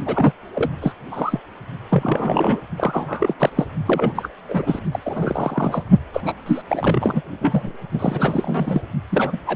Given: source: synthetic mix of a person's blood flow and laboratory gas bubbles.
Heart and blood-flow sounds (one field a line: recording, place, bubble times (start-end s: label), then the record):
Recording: Doppler ultrasound of blood flow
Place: precordium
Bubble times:
0.06-0.32 s: bubbles
0.54-0.71 s: bubbles
0.81-0.92 s: bubbles
1.11-1.40 s: bubbles
1.89-2.60 s: bubbles
2.77-3.34 s: bubbles
3.39-3.50 s: bubbles
3.56-3.66 s: bubbles
3.86-4.29 s: bubbles
4.48-4.79 s: bubbles
4.92-5.00 s: bubbles
5.03-5.83 s: bubbles
6.13-6.21 s: bubbles
6.25-6.33 s: bubbles
6.46-6.62 s: bubbles
6.67-7.21 s: bubbles
7.40-7.74 s: bubbles
7.92-8.81 s: bubbles
9.11-9.37 s: bubbles
9.46-9.56 s: bubbles
From the record:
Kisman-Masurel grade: 332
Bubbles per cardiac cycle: rolling drumbeat, 9 or more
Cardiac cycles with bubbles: 50 to 99%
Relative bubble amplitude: moderate (0.250 to 0.450)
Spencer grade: 3 (all of the cardiac periods contain showers or single bubble signals, but not dominating or overriding the cardiac motion signals)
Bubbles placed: only in the low amplitude regions of the cardiac cycle